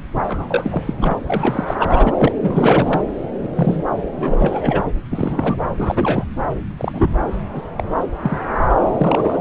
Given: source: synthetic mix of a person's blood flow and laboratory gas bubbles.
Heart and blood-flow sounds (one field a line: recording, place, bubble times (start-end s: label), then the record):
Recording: Doppler ultrasound of blood flow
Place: subclavian vein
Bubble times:
0.28-0.83 s: bubbles
0.86-0.94 s: bubbles
1.01-1.18 s: bubbles
1.23-1.76 s: bubbles
1.79-2.32 s: bubbles
2.42-3.02 s: bubbles
3.43-3.50 s: bubbles
3.56-3.83 s: bubbles
4.17-4.83 s: bubbles
5.10-5.56 s: bubbles
5.76-6.25 s: bubbles
6.77-7.10 s: bubbles
7.54-7.62 s: bubbles
7.77-7.83 s: bubbles
8.21-8.38 s: bubbles
8.91-9.38 s: bubbles
From the record:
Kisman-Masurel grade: 242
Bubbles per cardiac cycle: several, 3 to 8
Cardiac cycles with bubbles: 100%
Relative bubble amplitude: moderate (0.250 to 0.450)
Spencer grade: 3 (all of the cardiac periods contain showers or single bubble signals, but not dominating or overriding the cardiac motion signals)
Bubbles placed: anywhere in the cardiac cycle